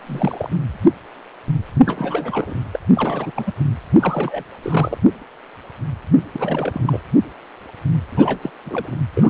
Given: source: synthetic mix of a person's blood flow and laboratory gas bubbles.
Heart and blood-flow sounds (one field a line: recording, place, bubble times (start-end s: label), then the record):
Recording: Doppler ultrasound of blood flow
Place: precordium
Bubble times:
0.01-0.50 s: bubbles
1.84-2.62 s: bubbles
2.73-2.79 s: bubbles
2.94-3.33 s: bubbles
3.35-3.53 s: bubbles
3.98-4.43 s: bubbles
4.62-4.97 s: bubbles
6.33-7.00 s: bubbles
8.12-8.50 s: bubbles
8.65-8.96 s: bubbles
9.15-9.30 s: bubbles
From the record:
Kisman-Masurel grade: 332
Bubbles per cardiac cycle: rolling drumbeat, 9 or more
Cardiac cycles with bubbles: 50 to 99%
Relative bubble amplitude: moderate (0.250 to 0.450)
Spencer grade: 3 (all of the cardiac periods contain showers or single bubble signals, but not dominating or overriding the cardiac motion signals)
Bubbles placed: anywhere in the cardiac cycle